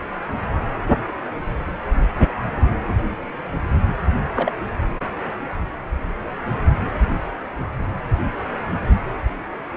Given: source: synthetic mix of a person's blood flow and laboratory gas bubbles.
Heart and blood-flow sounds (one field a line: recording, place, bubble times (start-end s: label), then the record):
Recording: Doppler ultrasound of blood flow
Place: precordium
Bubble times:
4.36-4.53 s: bubbles
From the record:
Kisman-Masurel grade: 112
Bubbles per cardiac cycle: 1 to 2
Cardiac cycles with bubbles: 1 to 10%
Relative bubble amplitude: moderate (0.250 to 0.450)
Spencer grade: 1 (occasional bubble signal discernible with the cardiac motion signal, with majority of cardiac periods free of bubbles)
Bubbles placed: anywhere in the cardiac cycle